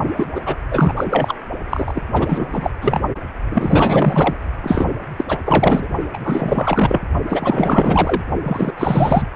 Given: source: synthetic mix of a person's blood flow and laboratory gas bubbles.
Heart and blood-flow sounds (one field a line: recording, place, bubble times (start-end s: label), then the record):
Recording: Doppler ultrasound of blood flow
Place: precordium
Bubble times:
0.16-0.30 s: bubbles
0.34-0.41 s: bubbles
0.45-0.55 s: bubbles
0.70-0.93 s: bubbles
0.96-1.36 s: bubbles
1.70-2.02 s: bubbles
2.14-2.47 s: bubbles
2.52-2.71 s: bubbles
2.81-3.00 s: bubbles
3.49-4.35 s: bubbles
4.62-4.86 s: bubbles
5.17-5.24 s: bubbles
5.28-5.38 s: bubbles
5.44-5.88 s: bubbles
6.13-7.01 s: bubbles
7.28-8.22 s: bubbles
8.43-8.73 s: bubbles
8.78-9.27 s: bubbles
From the record:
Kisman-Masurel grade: 444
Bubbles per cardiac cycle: continuous sound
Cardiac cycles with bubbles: 100%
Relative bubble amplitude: maximal (0.775 to 0.999)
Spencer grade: 4 (maximum detectable bubble signal sounding continuously throughout systole and diastole of every cardiac period, and overriding the amplitude of the normal cardiac signals)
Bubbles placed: only in the low amplitude regions of the cardiac cycle